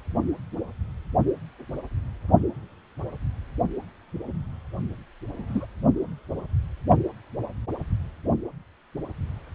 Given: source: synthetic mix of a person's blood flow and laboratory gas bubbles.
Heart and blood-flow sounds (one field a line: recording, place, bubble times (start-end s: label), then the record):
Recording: Doppler ultrasound of blood flow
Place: precordium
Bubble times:
5.38-5.67 s: bubbles
From the record:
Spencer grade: 1 (occasional bubble signal discernible with the cardiac motion signal, with majority of cardiac periods free of bubbles)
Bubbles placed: only in the low amplitude regions of the cardiac cycle